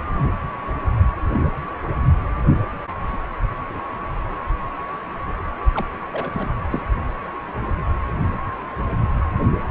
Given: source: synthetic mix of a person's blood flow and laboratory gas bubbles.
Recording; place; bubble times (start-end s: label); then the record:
Doppler ultrasound of blood flow; precordium
5.74-5.86 s: bubbles
6.12-6.50 s: bubbles
6.71-6.82 s: bubbles
From the record:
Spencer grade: 2 (many but less than half of the cardiac periods contain bubble signals, singularly or in groups); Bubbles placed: only in the low amplitude regions of the cardiac cycle